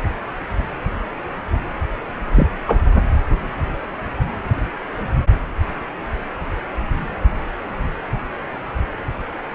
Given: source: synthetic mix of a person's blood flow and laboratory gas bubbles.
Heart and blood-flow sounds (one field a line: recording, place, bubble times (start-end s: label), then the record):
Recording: Doppler ultrasound of blood flow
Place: precordium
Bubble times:
2.34-2.48 s: bubbles
2.67-2.78 s: bubbles
From the record:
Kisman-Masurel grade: 113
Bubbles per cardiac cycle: 1 to 2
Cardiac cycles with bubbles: 1 to 10%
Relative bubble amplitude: loud (0.450 to 0.775)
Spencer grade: 1 (occasional bubble signal discernible with the cardiac motion signal, with majority of cardiac periods free of bubbles)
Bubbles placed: anywhere in the cardiac cycle